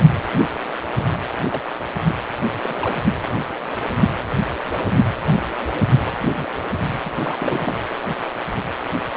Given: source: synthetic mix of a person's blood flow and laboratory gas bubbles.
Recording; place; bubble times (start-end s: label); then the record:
Doppler ultrasound of blood flow; precordium
0.98-1.04 s: bubbles
1.49-1.61 s: bubbles
2.07-2.12 s: bubbles
2.63-2.97 s: bubbles
6.21-6.45 s: bubbles
7.04-7.11 s: bubbles
7.23-7.74 s: bubbles
From the record:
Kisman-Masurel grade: 221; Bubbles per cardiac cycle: several, 3 to 8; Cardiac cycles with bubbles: 10 to 50%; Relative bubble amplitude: barely perceptible (0.100 to 0.250); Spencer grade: 2 (many but less than half of the cardiac periods contain bubble signals, singularly or in groups); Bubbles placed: anywhere in the cardiac cycle